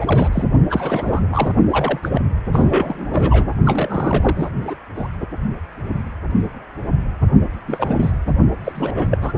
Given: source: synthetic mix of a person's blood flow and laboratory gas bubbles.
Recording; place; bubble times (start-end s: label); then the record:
Doppler ultrasound of blood flow; precordium
0.00-0.29 s: bubbles
0.32-0.44 s: bubbles
0.69-1.21 s: bubbles
1.31-1.54 s: bubbles
1.70-2.00 s: bubbles
2.02-2.21 s: bubbles
2.52-3.53 s: bubbles
3.65-4.50 s: bubbles
4.62-4.75 s: bubbles
4.96-5.08 s: bubbles
7.67-8.11 s: bubbles
8.26-8.31 s: bubbles
8.63-8.72 s: bubbles
8.75-9.18 s: bubbles
9.21-9.34 s: bubbles
From the record:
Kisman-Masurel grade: 332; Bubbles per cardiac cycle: rolling drumbeat, 9 or more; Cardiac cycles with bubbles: 50 to 99%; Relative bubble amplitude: moderate (0.250 to 0.450); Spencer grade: 3 (all of the cardiac periods contain showers or single bubble signals, but not dominating or overriding the cardiac motion signals); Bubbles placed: only in the low amplitude regions of the cardiac cycle